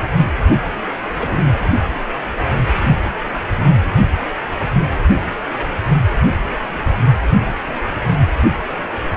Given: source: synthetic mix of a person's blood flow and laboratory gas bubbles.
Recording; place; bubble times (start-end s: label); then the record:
Doppler ultrasound of blood flow; precordium
1.18-1.59 s: bubbles
From the record:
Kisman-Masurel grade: 122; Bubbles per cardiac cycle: 1 to 2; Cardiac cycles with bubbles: 10 to 50%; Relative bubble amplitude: moderate (0.250 to 0.450); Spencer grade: 2 (many but less than half of the cardiac periods contain bubble signals, singularly or in groups); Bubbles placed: only in the low amplitude regions of the cardiac cycle